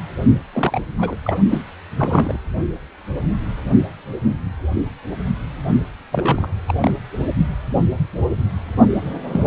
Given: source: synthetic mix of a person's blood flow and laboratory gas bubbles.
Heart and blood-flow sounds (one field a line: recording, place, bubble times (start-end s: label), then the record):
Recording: Doppler ultrasound of blood flow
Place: precordium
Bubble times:
0.53-0.81 s: bubbles
0.97-1.16 s: bubbles
1.25-1.38 s: bubbles
1.50-1.64 s: bubbles
1.99-2.38 s: bubbles
6.12-6.49 s: bubbles
6.67-6.74 s: bubbles
6.80-6.94 s: bubbles
9.32-9.46 s: bubbles
From the record:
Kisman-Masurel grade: 232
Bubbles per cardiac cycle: several, 3 to 8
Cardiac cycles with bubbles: 50 to 99%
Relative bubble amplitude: moderate (0.250 to 0.450)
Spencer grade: 3 (all of the cardiac periods contain showers or single bubble signals, but not dominating or overriding the cardiac motion signals)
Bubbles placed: only in the low amplitude regions of the cardiac cycle